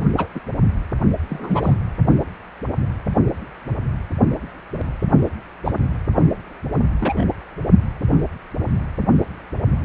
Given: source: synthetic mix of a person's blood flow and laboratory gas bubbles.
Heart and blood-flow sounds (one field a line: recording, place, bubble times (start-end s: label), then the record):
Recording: Doppler ultrasound of blood flow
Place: precordium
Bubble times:
0.17-0.29 s: bubbles
0.35-0.40 s: bubbles
1.29-1.77 s: bubbles
5.65-5.72 s: bubbles
7.01-7.25 s: bubbles
From the record:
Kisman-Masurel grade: 122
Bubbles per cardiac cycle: 1 to 2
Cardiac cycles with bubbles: 10 to 50%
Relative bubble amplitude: moderate (0.250 to 0.450)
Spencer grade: 2 (many but less than half of the cardiac periods contain bubble signals, singularly or in groups)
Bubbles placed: anywhere in the cardiac cycle